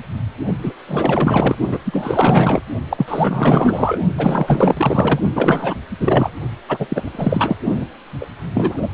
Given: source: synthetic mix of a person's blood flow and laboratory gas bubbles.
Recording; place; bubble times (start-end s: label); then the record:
Doppler ultrasound of blood flow; precordium
0.47-0.53 s: bubbles
0.63-0.73 s: bubbles
0.88-1.55 s: bubbles
1.68-1.78 s: bubbles
1.86-2.62 s: bubbles
2.90-3.99 s: bubbles
4.17-5.20 s: bubbles
5.35-5.75 s: bubbles
6.00-6.32 s: bubbles
6.69-7.56 s: bubbles
7.75-7.85 s: bubbles
8.21-8.26 s: bubbles
8.54-8.88 s: bubbles
From the record:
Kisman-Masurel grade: 444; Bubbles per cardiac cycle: continuous sound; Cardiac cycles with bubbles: 100%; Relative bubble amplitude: maximal (0.775 to 0.999); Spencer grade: 4 (maximum detectable bubble signal sounding continuously throughout systole and diastole of every cardiac period, and overriding the amplitude of the normal cardiac signals); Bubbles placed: only in the low amplitude regions of the cardiac cycle